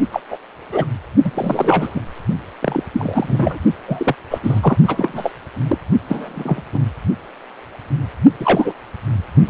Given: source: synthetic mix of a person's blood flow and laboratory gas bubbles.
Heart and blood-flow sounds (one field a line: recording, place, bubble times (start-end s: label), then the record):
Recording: Doppler ultrasound of blood flow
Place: precordium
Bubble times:
0.11-0.20 s: bubbles
0.30-0.38 s: bubbles
0.72-0.85 s: bubbles
1.23-1.31 s: bubbles
1.34-2.00 s: bubbles
2.61-2.82 s: bubbles
2.93-3.58 s: bubbles
3.88-4.15 s: bubbles
4.30-4.39 s: bubbles
4.43-4.77 s: bubbles
4.87-5.31 s: bubbles
5.68-5.78 s: bubbles
6.08-6.62 s: bubbles
6.74-6.79 s: bubbles
8.39-8.72 s: bubbles
9.47-9.50 s: bubbles
From the record:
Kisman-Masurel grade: 233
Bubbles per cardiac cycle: several, 3 to 8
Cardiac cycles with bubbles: 50 to 99%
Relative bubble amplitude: loud (0.450 to 0.775)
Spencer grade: 3 (all of the cardiac periods contain showers or single bubble signals, but not dominating or overriding the cardiac motion signals)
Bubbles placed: only in the low amplitude regions of the cardiac cycle